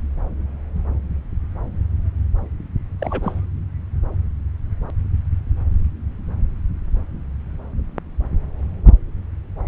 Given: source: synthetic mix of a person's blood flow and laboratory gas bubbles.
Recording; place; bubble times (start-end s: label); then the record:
Doppler ultrasound of blood flow; subclavian vein
2.99-3.40 s: bubbles
From the record:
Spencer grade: 1 (occasional bubble signal discernible with the cardiac motion signal, with majority of cardiac periods free of bubbles); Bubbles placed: anywhere in the cardiac cycle